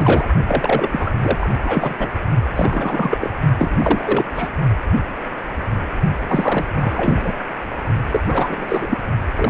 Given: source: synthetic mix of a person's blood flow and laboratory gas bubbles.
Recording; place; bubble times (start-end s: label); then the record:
Doppler ultrasound of blood flow; precordium
0.00-0.28 s: bubbles
0.48-0.88 s: bubbles
0.91-1.11 s: bubbles
1.21-1.50 s: bubbles
1.64-2.07 s: bubbles
2.56-3.17 s: bubbles
3.21-3.33 s: bubbles
3.58-4.25 s: bubbles
4.34-4.49 s: bubbles
6.28-6.65 s: bubbles
6.75-7.32 s: bubbles
7.39-7.44 s: bubbles
8.11-8.21 s: bubbles
8.27-8.98 s: bubbles
9.35-9.50 s: bubbles
From the record:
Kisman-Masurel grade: 333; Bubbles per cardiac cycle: rolling drumbeat, 9 or more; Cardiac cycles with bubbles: 50 to 99%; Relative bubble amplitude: loud (0.450 to 0.775); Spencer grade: 3 (all of the cardiac periods contain showers or single bubble signals, but not dominating or overriding the cardiac motion signals); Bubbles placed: only in the low amplitude regions of the cardiac cycle